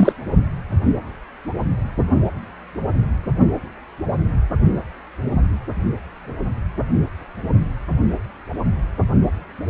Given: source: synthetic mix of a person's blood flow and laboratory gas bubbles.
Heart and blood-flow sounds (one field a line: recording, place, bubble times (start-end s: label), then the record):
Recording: Doppler ultrasound of blood flow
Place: precordium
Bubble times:
0.00-0.12 s: bubbles
From the record:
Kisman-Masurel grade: 213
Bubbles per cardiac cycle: several, 3 to 8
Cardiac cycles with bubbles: 1 to 10%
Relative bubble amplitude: loud (0.450 to 0.775)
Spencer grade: 1 (occasional bubble signal discernible with the cardiac motion signal, with majority of cardiac periods free of bubbles)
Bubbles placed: only in the low amplitude regions of the cardiac cycle